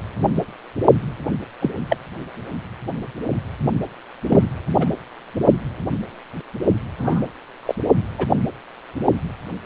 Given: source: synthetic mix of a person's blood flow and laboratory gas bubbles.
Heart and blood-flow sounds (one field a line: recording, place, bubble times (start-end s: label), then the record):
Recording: Doppler ultrasound of blood flow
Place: precordium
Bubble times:
1.61-1.70 s: bubbles
1.89-1.96 s: bubbles
4.28-4.43 s: bubbles
4.79-4.88 s: bubbles
6.97-7.28 s: bubbles
7.65-7.74 s: bubbles
8.18-8.26 s: bubbles
From the record:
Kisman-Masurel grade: 122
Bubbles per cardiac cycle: 1 to 2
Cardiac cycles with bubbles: 10 to 50%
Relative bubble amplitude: moderate (0.250 to 0.450)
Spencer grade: 2 (many but less than half of the cardiac periods contain bubble signals, singularly or in groups)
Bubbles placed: only in the low amplitude regions of the cardiac cycle